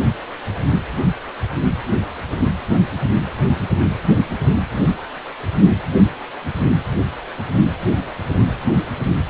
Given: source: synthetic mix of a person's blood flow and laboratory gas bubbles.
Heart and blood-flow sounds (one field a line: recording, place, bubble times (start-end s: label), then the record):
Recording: Doppler ultrasound of blood flow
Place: precordium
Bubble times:
no bubbles
From the record:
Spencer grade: 0 (complete lack of bubble signals)